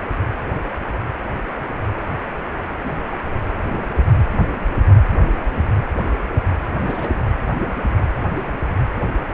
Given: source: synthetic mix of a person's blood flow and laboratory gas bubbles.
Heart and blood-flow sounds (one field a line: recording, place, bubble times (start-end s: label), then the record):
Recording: Doppler ultrasound of blood flow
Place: precordium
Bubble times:
2.76-2.96 s: bubbles
5.97-6.02 s: bubbles
6.75-6.81 s: bubbles
6.88-7.08 s: bubbles
8.37-8.52 s: bubbles
From the record:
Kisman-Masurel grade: 121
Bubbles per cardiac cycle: 1 to 2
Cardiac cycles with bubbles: 10 to 50%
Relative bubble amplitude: barely perceptible (0.100 to 0.250)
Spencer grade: 2 (many but less than half of the cardiac periods contain bubble signals, singularly or in groups)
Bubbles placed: anywhere in the cardiac cycle